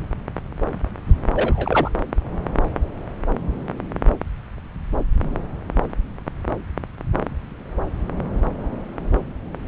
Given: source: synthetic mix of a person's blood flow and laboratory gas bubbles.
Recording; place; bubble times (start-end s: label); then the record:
Doppler ultrasound of blood flow; subclavian vein
1.34-1.90 s: bubbles
From the record:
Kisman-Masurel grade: 113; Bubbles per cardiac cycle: 1 to 2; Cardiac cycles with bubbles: 1 to 10%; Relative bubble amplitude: loud (0.450 to 0.775); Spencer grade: 1 (occasional bubble signal discernible with the cardiac motion signal, with majority of cardiac periods free of bubbles); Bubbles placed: anywhere in the cardiac cycle